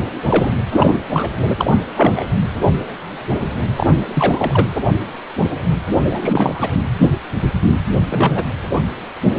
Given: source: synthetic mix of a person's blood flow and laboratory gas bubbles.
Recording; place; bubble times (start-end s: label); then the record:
Doppler ultrasound of blood flow; precordium
0.27-0.51 s: bubbles
0.69-1.01 s: bubbles
1.12-1.28 s: bubbles
1.58-1.73 s: bubbles
1.96-2.23 s: bubbles
3.76-3.91 s: bubbles
4.12-4.67 s: bubbles
6.04-6.71 s: bubbles
8.09-8.45 s: bubbles
From the record:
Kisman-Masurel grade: 233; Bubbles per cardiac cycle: several, 3 to 8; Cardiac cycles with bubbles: 50 to 99%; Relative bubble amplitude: loud (0.450 to 0.775); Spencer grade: 3 (all of the cardiac periods contain showers or single bubble signals, but not dominating or overriding the cardiac motion signals); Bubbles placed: anywhere in the cardiac cycle